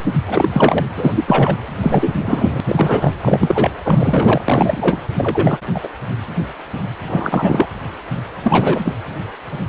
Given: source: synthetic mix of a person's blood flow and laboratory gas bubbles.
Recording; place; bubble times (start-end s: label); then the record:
Doppler ultrasound of blood flow; precordium
0.00-0.02 s: bubbles
0.27-0.49 s: bubbles
0.53-0.85 s: bubbles
0.95-1.58 s: bubbles
1.81-2.60 s: bubbles
2.68-3.15 s: bubbles
3.21-3.71 s: bubbles
3.83-4.42 s: bubbles
4.47-5.01 s: bubbles
5.17-5.59 s: bubbles
5.74-5.88 s: bubbles
7.09-7.67 s: bubbles
8.42-8.93 s: bubbles
From the record:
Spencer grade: 3 (all of the cardiac periods contain showers or single bubble signals, but not dominating or overriding the cardiac motion signals); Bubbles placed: anywhere in the cardiac cycle